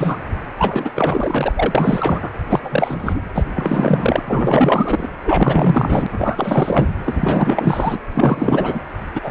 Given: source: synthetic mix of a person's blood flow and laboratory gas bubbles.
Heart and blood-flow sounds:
Doppler ultrasound of blood flow; precordium
0.00-0.18 s: bubbles
0.58-0.91 s: bubbles
0.95-1.53 s: bubbles
1.55-2.30 s: bubbles
2.49-3.21 s: bubbles
3.34-3.45 s: bubbles
3.54-5.10 s: bubbles
5.25-6.88 s: bubbles
7.04-7.99 s: bubbles
8.15-8.84 s: bubbles
9.15-9.31 s: bubbles
From the record:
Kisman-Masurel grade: 444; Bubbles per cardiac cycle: continuous sound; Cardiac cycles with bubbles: 100%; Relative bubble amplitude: maximal (0.775 to 0.999); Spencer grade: 4 (maximum detectable bubble signal sounding continuously throughout systole and diastole of every cardiac period, and overriding the amplitude of the normal cardiac signals); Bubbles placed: anywhere in the cardiac cycle

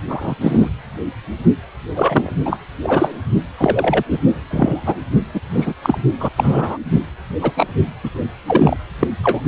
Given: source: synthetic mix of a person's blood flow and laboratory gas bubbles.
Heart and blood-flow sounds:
Doppler ultrasound of blood flow; precordium
0.08-0.35 s: bubbles
0.40-0.70 s: bubbles
1.95-2.32 s: bubbles
2.45-2.56 s: bubbles
2.83-3.17 s: bubbles
3.57-4.04 s: bubbles
4.10-4.19 s: bubbles
4.50-5.00 s: bubbles
5.34-5.41 s: bubbles
5.53-5.73 s: bubbles
5.82-5.98 s: bubbles
6.19-6.29 s: bubbles
6.36-6.78 s: bubbles
7.42-7.51 s: bubbles
7.56-7.67 s: bubbles
8.03-8.11 s: bubbles
8.46-8.77 s: bubbles
9.01-9.07 s: bubbles
9.23-9.41 s: bubbles
From the record:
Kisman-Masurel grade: 243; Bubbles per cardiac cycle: several, 3 to 8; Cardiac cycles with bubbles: 100%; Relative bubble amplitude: loud (0.450 to 0.775); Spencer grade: 3 (all of the cardiac periods contain showers or single bubble signals, but not dominating or overriding the cardiac motion signals); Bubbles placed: only in the low amplitude regions of the cardiac cycle

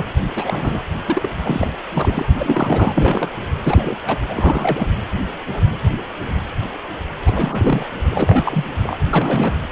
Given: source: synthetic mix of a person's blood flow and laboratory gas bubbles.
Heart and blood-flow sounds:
Doppler ultrasound of blood flow; precordium
0.00-0.05 s: bubbles
0.35-0.80 s: bubbles
1.06-1.29 s: bubbles
1.43-1.72 s: bubbles
1.94-2.25 s: bubbles
2.39-3.38 s: bubbles
3.64-3.97 s: bubbles
4.06-4.19 s: bubbles
4.28-4.87 s: bubbles
7.24-7.88 s: bubbles
8.10-8.65 s: bubbles
8.83-8.97 s: bubbles
9.13-9.52 s: bubbles
From the record:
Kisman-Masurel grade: 332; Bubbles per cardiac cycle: rolling drumbeat, 9 or more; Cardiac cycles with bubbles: 50 to 99%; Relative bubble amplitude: moderate (0.250 to 0.450); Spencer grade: 3 (all of the cardiac periods contain showers or single bubble signals, but not dominating or overriding the cardiac motion signals); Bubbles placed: anywhere in the cardiac cycle

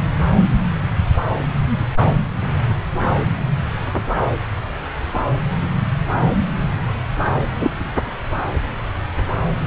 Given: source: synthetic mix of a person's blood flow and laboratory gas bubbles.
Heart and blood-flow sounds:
Doppler ultrasound of blood flow; subclavian vein
7.61-7.70 s: bubbles
From the record:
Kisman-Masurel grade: 113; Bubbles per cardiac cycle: 1 to 2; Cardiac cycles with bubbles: 1 to 10%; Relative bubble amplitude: loud (0.450 to 0.775); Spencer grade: 1 (occasional bubble signal discernible with the cardiac motion signal, with majority of cardiac periods free of bubbles); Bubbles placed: anywhere in the cardiac cycle

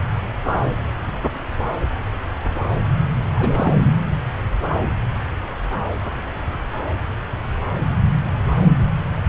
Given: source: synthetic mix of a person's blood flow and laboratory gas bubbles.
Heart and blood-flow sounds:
Doppler ultrasound of blood flow; subclavian vein
3.35-3.73 s: bubbles
From the record:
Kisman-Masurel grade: 212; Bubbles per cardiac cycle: several, 3 to 8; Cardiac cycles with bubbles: 1 to 10%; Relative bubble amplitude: moderate (0.250 to 0.450); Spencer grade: 1 (occasional bubble signal discernible with the cardiac motion signal, with majority of cardiac periods free of bubbles); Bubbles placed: anywhere in the cardiac cycle

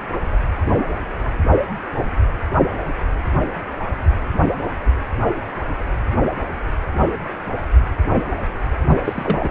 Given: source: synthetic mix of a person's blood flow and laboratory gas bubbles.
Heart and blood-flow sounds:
Doppler ultrasound of blood flow; precordium
8.87-8.98 s: bubbles
9.04-9.49 s: bubbles
From the record:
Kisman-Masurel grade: 212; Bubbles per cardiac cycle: several, 3 to 8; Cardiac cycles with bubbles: 1 to 10%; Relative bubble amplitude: moderate (0.250 to 0.450); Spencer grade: 1 (occasional bubble signal discernible with the cardiac motion signal, with majority of cardiac periods free of bubbles); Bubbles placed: anywhere in the cardiac cycle

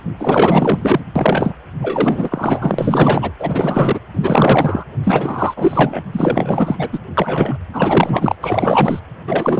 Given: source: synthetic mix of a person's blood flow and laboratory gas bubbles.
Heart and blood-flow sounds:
Doppler ultrasound of blood flow; precordium
0.18-1.01 s: bubbles
1.16-1.53 s: bubbles
1.79-3.31 s: bubbles
3.39-4.00 s: bubbles
4.13-4.84 s: bubbles
5.04-6.03 s: bubbles
6.12-6.88 s: bubbles
6.92-6.99 s: bubbles
7.17-7.57 s: bubbles
7.73-8.35 s: bubbles
8.41-8.99 s: bubbles
9.26-9.59 s: bubbles
From the record:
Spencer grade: 4 (maximum detectable bubble signal sounding continuously throughout systole and diastole of every cardiac period, and overriding the amplitude of the normal cardiac signals); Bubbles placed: anywhere in the cardiac cycle

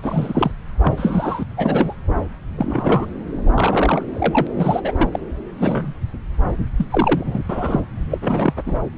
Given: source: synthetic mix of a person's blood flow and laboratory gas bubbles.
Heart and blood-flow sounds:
Doppler ultrasound of blood flow; subclavian vein
0.03-0.51 s: bubbles
0.82-0.93 s: bubbles
0.97-1.43 s: bubbles
1.57-1.93 s: bubbles
2.58-3.06 s: bubbles
3.54-4.04 s: bubbles
4.13-4.47 s: bubbles
4.54-4.92 s: bubbles
4.98-5.08 s: bubbles
5.12-5.19 s: bubbles
5.58-5.93 s: bubbles
6.77-6.86 s: bubbles
6.90-7.41 s: bubbles
7.49-7.80 s: bubbles
8.11-8.19 s: bubbles
8.21-8.54 s: bubbles
8.57-8.62 s: bubbles
8.66-8.79 s: bubbles
From the record:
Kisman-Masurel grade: 233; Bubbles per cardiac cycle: several, 3 to 8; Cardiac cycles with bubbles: 50 to 99%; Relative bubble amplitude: loud (0.450 to 0.775); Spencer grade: 3 (all of the cardiac periods contain showers or single bubble signals, but not dominating or overriding the cardiac motion signals); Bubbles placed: anywhere in the cardiac cycle

